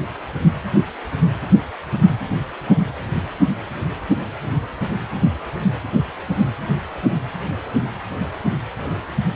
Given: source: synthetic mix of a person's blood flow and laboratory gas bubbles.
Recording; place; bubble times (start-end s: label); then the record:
Doppler ultrasound of blood flow; precordium
no bubbles
From the record:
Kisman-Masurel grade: 000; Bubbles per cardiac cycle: 0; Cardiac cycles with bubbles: 0%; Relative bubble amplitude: no bubbles discernible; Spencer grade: 0 (complete lack of bubble signals)